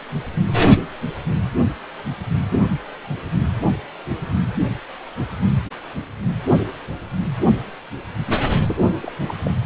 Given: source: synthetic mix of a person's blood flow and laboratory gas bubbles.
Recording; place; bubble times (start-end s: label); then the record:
Doppler ultrasound of blood flow; precordium
8.48-8.53 s: bubbles
8.67-8.81 s: bubbles
9.02-9.12 s: bubbles
9.28-9.34 s: bubbles
9.44-9.51 s: bubbles
From the record:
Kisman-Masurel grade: 211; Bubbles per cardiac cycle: several, 3 to 8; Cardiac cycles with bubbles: 1 to 10%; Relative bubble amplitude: barely perceptible (0.100 to 0.250); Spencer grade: 1 (occasional bubble signal discernible with the cardiac motion signal, with majority of cardiac periods free of bubbles); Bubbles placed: anywhere in the cardiac cycle